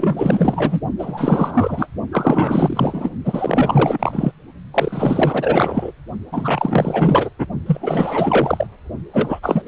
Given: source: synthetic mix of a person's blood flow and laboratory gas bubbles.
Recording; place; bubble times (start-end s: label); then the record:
Doppler ultrasound of blood flow; precordium
0.00-0.80 s: bubbles
0.99-1.87 s: bubbles
2.12-3.10 s: bubbles
3.25-4.32 s: bubbles
4.74-5.92 s: bubbles
6.32-7.30 s: bubbles
7.38-7.47 s: bubbles
7.66-8.67 s: bubbles
9.13-9.39 s: bubbles
9.43-9.62 s: bubbles
9.65-9.68 s: bubbles
From the record:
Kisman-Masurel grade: 444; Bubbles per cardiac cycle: continuous sound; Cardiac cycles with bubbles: 100%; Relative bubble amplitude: maximal (0.775 to 0.999); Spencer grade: 4 (maximum detectable bubble signal sounding continuously throughout systole and diastole of every cardiac period, and overriding the amplitude of the normal cardiac signals); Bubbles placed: only in the low amplitude regions of the cardiac cycle